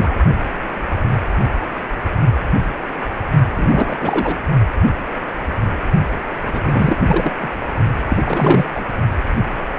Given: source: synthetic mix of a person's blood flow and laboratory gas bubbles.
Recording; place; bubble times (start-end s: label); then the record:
Doppler ultrasound of blood flow; precordium
0.00-0.14 s: bubbles
3.55-3.97 s: bubbles
4.00-4.37 s: bubbles
6.47-6.98 s: bubbles
7.06-7.31 s: bubbles
7.42-7.50 s: bubbles
8.10-8.66 s: bubbles
8.74-8.85 s: bubbles
From the record:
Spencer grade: 3 (all of the cardiac periods contain showers or single bubble signals, but not dominating or overriding the cardiac motion signals); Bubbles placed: only in the low amplitude regions of the cardiac cycle